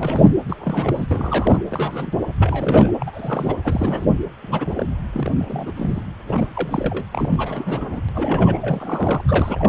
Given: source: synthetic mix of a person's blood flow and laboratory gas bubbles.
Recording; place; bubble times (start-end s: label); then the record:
Doppler ultrasound of blood flow; precordium
0.00-0.34 s: bubbles
0.48-1.07 s: bubbles
1.10-1.61 s: bubbles
1.70-2.19 s: bubbles
2.39-2.92 s: bubbles
3.00-3.55 s: bubbles
3.63-4.06 s: bubbles
4.42-4.86 s: bubbles
5.13-5.32 s: bubbles
5.39-5.72 s: bubbles
5.76-6.04 s: bubbles
6.27-7.06 s: bubbles
7.12-8.01 s: bubbles
8.08-9.22 s: bubbles
9.28-9.69 s: bubbles
From the record:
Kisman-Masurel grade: 342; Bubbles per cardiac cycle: rolling drumbeat, 9 or more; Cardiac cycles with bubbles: 100%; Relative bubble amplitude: moderate (0.250 to 0.450); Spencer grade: 3 (all of the cardiac periods contain showers or single bubble signals, but not dominating or overriding the cardiac motion signals); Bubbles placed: anywhere in the cardiac cycle